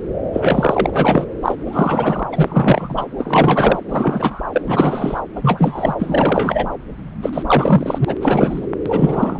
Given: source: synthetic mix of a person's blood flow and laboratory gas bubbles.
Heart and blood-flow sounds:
Doppler ultrasound of blood flow; subclavian vein
0.33-0.90 s: bubbles
0.93-1.25 s: bubbles
1.42-1.55 s: bubbles
1.66-2.24 s: bubbles
2.32-3.06 s: bubbles
3.18-3.79 s: bubbles
3.88-4.42 s: bubbles
4.52-4.62 s: bubbles
4.66-5.20 s: bubbles
5.36-5.95 s: bubbles
5.99-6.67 s: bubbles
7.22-7.30 s: bubbles
7.33-7.43 s: bubbles
7.46-8.15 s: bubbles
8.21-8.67 s: bubbles
8.85-9.39 s: bubbles
From the record:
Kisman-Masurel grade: 343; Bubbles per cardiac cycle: rolling drumbeat, 9 or more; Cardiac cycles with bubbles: 100%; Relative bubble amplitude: loud (0.450 to 0.775); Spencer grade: 3 (all of the cardiac periods contain showers or single bubble signals, but not dominating or overriding the cardiac motion signals); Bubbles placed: anywhere in the cardiac cycle

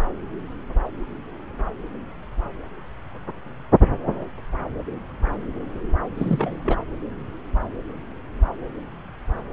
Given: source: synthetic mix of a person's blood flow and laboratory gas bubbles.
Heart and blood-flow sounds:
Doppler ultrasound of blood flow; subclavian vein
6.17-6.57 s: bubbles
6.64-6.76 s: bubbles
From the record:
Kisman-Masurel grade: 212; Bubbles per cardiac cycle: several, 3 to 8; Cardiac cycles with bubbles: 1 to 10%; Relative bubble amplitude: moderate (0.250 to 0.450); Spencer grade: 1 (occasional bubble signal discernible with the cardiac motion signal, with majority of cardiac periods free of bubbles); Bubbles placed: anywhere in the cardiac cycle

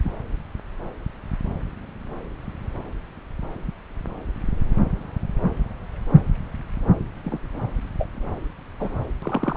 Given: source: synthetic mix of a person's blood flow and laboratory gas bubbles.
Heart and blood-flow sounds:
Doppler ultrasound of blood flow; subclavian vein
0.03-0.12 s: bubbles
7.24-7.39 s: bubbles
7.99-8.09 s: bubbles
8.79-8.91 s: bubbles
9.22-9.56 s: bubbles
From the record:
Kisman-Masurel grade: 122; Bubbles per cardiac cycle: 1 to 2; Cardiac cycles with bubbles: 10 to 50%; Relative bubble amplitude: moderate (0.250 to 0.450); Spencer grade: 2 (many but less than half of the cardiac periods contain bubble signals, singularly or in groups); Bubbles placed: anywhere in the cardiac cycle

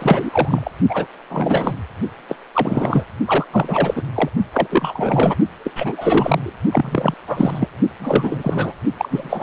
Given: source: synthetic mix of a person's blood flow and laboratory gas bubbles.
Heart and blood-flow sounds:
Doppler ultrasound of blood flow; precordium
0.00-0.70 s: bubbles
0.89-1.06 s: bubbles
1.29-1.73 s: bubbles
2.29-2.35 s: bubbles
2.54-3.04 s: bubbles
3.25-3.45 s: bubbles
3.51-4.04 s: bubbles
4.14-4.29 s: bubbles
4.54-5.35 s: bubbles
5.64-5.71 s: bubbles
5.75-6.53 s: bubbles
6.71-7.14 s: bubbles
7.27-7.67 s: bubbles
7.99-8.74 s: bubbles
8.98-9.43 s: bubbles
From the record:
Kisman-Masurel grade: 343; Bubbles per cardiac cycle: rolling drumbeat, 9 or more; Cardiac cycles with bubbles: 100%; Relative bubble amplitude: loud (0.450 to 0.775); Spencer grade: 3 (all of the cardiac periods contain showers or single bubble signals, but not dominating or overriding the cardiac motion signals); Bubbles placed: only in the low amplitude regions of the cardiac cycle

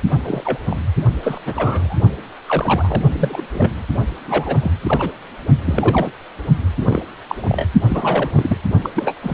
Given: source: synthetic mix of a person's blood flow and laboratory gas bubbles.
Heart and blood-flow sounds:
Doppler ultrasound of blood flow; precordium
0.23-0.58 s: bubbles
0.70-0.77 s: bubbles
1.23-1.40 s: bubbles
1.45-2.01 s: bubbles
2.46-3.02 s: bubbles
3.12-3.42 s: bubbles
3.52-3.73 s: bubbles
4.23-4.71 s: bubbles
4.83-5.11 s: bubbles
5.65-6.12 s: bubbles
6.79-7.02 s: bubbles
7.28-7.65 s: bubbles
7.89-8.30 s: bubbles
8.36-8.57 s: bubbles
8.83-8.89 s: bubbles
8.95-9.16 s: bubbles
9.21-9.33 s: bubbles
From the record:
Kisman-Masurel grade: 242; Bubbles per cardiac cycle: several, 3 to 8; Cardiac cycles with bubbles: 100%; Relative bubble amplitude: moderate (0.250 to 0.450); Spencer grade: 3 (all of the cardiac periods contain showers or single bubble signals, but not dominating or overriding the cardiac motion signals); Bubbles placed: only in the low amplitude regions of the cardiac cycle

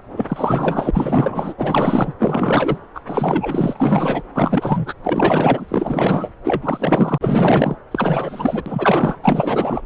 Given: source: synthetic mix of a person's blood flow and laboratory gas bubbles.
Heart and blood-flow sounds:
Doppler ultrasound of blood flow; subclavian vein
0.16-0.26 s: bubbles
0.28-0.91 s: bubbles
0.93-1.53 s: bubbles
1.56-2.14 s: bubbles
2.19-2.79 s: bubbles
2.95-3.01 s: bubbles
3.07-4.24 s: bubbles
4.34-4.94 s: bubbles
5.04-6.29 s: bubbles
6.44-7.18 s: bubbles
7.21-7.75 s: bubbles
7.91-8.62 s: bubbles
8.66-9.19 s: bubbles
9.22-9.81 s: bubbles
From the record:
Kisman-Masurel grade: 444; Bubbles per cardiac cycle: continuous sound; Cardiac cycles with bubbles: 100%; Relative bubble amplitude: maximal (0.775 to 0.999); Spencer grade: 4 (maximum detectable bubble signal sounding continuously throughout systole and diastole of every cardiac period, and overriding the amplitude of the normal cardiac signals); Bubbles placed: anywhere in the cardiac cycle

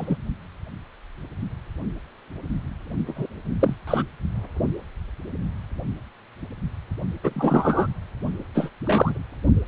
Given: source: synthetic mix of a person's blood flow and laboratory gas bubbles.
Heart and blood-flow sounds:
Doppler ultrasound of blood flow; precordium
0.00-0.16 s: bubbles
3.06-3.27 s: bubbles
3.59-3.75 s: bubbles
3.87-4.03 s: bubbles
7.23-7.87 s: bubbles
8.54-8.71 s: bubbles
8.85-9.23 s: bubbles
From the record:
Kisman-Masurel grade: 223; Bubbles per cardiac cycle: several, 3 to 8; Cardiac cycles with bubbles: 10 to 50%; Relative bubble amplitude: loud (0.450 to 0.775); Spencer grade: 2 (many but less than half of the cardiac periods contain bubble signals, singularly or in groups); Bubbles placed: only in the low amplitude regions of the cardiac cycle

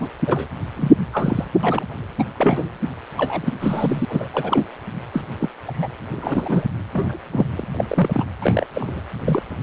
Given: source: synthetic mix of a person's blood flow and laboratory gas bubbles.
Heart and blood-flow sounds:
Doppler ultrasound of blood flow; precordium
0.00-0.09 s: bubbles
0.27-0.46 s: bubbles
0.76-0.92 s: bubbles
1.12-1.45 s: bubbles
1.63-1.84 s: bubbles
2.19-2.24 s: bubbles
2.37-2.69 s: bubbles
3.17-3.53 s: bubbles
3.61-4.05 s: bubbles
4.08-4.29 s: bubbles
4.33-4.65 s: bubbles
5.12-5.22 s: bubbles
5.40-5.49 s: bubbles
5.67-5.88 s: bubbles
6.13-6.65 s: bubbles
6.92-7.17 s: bubbles
7.32-7.46 s: bubbles
7.51-7.67 s: bubbles
7.74-7.85 s: bubbles
7.88-8.25 s: bubbles
8.41-8.65 s: bubbles
8.73-9.02 s: bubbles
9.26-9.43 s: bubbles
From the record:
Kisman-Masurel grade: 242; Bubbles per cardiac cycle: several, 3 to 8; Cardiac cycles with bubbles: 100%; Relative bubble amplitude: moderate (0.250 to 0.450); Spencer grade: 3 (all of the cardiac periods contain showers or single bubble signals, but not dominating or overriding the cardiac motion signals); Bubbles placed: anywhere in the cardiac cycle

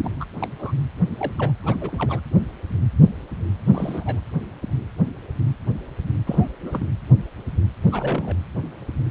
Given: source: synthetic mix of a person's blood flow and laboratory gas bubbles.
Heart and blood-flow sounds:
Doppler ultrasound of blood flow; precordium
0.02-0.25 s: bubbles
0.40-0.48 s: bubbles
0.59-0.71 s: bubbles
1.17-1.32 s: bubbles
1.38-1.52 s: bubbles
1.64-1.76 s: bubbles
1.80-2.20 s: bubbles
3.67-4.20 s: bubbles
6.26-6.47 s: bubbles
6.61-6.86 s: bubbles
7.91-8.36 s: bubbles
From the record:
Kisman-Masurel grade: 221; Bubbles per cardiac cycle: several, 3 to 8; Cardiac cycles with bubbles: 10 to 50%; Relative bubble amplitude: barely perceptible (0.100 to 0.250); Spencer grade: 2 (many but less than half of the cardiac periods contain bubble signals, singularly or in groups); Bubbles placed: anywhere in the cardiac cycle

